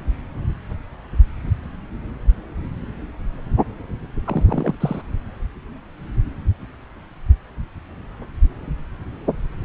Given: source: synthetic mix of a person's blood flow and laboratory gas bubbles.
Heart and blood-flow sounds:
Doppler ultrasound of blood flow; subclavian vein
4.25-4.75 s: bubbles
4.80-5.01 s: bubbles
From the record:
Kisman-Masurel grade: 122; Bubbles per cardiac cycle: 1 to 2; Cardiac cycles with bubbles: 10 to 50%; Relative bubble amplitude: moderate (0.250 to 0.450); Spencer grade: 2 (many but less than half of the cardiac periods contain bubble signals, singularly or in groups); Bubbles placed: anywhere in the cardiac cycle

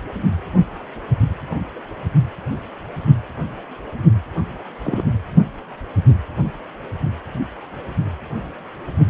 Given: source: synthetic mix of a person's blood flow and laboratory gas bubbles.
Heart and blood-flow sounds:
Doppler ultrasound of blood flow; precordium
4.84-5.02 s: bubbles
From the record:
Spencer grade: 2 (many but less than half of the cardiac periods contain bubble signals, singularly or in groups); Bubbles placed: only in the low amplitude regions of the cardiac cycle

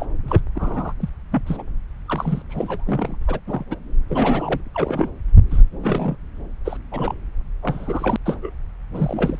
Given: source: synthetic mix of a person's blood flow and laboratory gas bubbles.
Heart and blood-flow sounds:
Doppler ultrasound of blood flow; subclavian vein
0.00-0.05 s: bubbles
0.24-0.40 s: bubbles
0.54-0.93 s: bubbles
1.00-1.09 s: bubbles
1.32-1.43 s: bubbles
1.47-1.62 s: bubbles
2.05-2.42 s: bubbles
2.49-3.17 s: bubbles
3.21-3.23 s: bubbles
3.27-3.40 s: bubbles
3.47-3.63 s: bubbles
3.70-3.76 s: bubbles
4.10-4.61 s: bubbles
4.74-5.09 s: bubbles
5.50-5.62 s: bubbles
5.82-6.16 s: bubbles
6.65-6.77 s: bubbles
6.92-7.14 s: bubbles
7.62-8.16 s: bubbles
8.26-8.54 s: bubbles
8.94-9.40 s: bubbles
From the record:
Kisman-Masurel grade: 242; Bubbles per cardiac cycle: several, 3 to 8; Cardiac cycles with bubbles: 100%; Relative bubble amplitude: moderate (0.250 to 0.450); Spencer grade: 3 (all of the cardiac periods contain showers or single bubble signals, but not dominating or overriding the cardiac motion signals); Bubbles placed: anywhere in the cardiac cycle

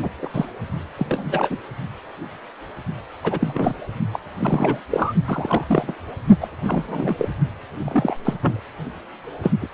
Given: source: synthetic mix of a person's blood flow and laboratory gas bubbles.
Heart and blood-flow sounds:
Doppler ultrasound of blood flow; precordium
0.02-0.10 s: bubbles
0.22-0.30 s: bubbles
0.33-0.45 s: bubbles
0.97-1.07 s: bubbles
1.09-1.58 s: bubbles
3.23-3.73 s: bubbles
4.13-4.19 s: bubbles
4.38-4.80 s: bubbles
4.91-5.13 s: bubbles
5.25-5.64 s: bubbles
5.68-5.94 s: bubbles
6.41-6.49 s: bubbles
6.65-7.15 s: bubbles
7.18-7.29 s: bubbles
7.80-8.17 s: bubbles
8.24-8.33 s: bubbles
8.40-8.60 s: bubbles
9.43-9.52 s: bubbles
9.62-9.67 s: bubbles
From the record:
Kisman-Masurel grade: 242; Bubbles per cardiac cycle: several, 3 to 8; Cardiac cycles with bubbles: 100%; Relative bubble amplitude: moderate (0.250 to 0.450); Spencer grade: 3 (all of the cardiac periods contain showers or single bubble signals, but not dominating or overriding the cardiac motion signals); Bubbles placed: only in the low amplitude regions of the cardiac cycle

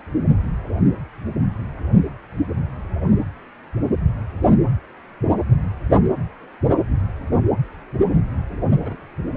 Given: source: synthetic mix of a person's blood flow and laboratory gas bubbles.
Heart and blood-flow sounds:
Doppler ultrasound of blood flow; precordium
8.81-8.96 s: bubbles
From the record:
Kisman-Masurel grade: 111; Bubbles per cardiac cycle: 1 to 2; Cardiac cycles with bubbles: 1 to 10%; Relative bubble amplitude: barely perceptible (0.100 to 0.250); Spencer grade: 1 (occasional bubble signal discernible with the cardiac motion signal, with majority of cardiac periods free of bubbles); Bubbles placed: anywhere in the cardiac cycle

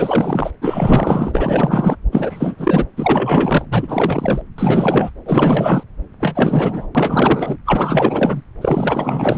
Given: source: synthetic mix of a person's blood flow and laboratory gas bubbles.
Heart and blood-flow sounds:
Doppler ultrasound of blood flow; subclavian vein
0.00-0.50 s: bubbles
0.61-1.96 s: bubbles
2.12-2.55 s: bubbles
2.58-2.85 s: bubbles
2.96-3.65 s: bubbles
3.71-4.42 s: bubbles
4.58-5.10 s: bubbles
5.26-5.83 s: bubbles
6.20-6.88 s: bubbles
6.94-7.57 s: bubbles
7.65-8.42 s: bubbles
8.61-9.38 s: bubbles
From the record:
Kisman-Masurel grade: 444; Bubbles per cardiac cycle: continuous sound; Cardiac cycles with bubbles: 100%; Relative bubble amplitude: maximal (0.775 to 0.999); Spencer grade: 4 (maximum detectable bubble signal sounding continuously throughout systole and diastole of every cardiac period, and overriding the amplitude of the normal cardiac signals); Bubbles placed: anywhere in the cardiac cycle

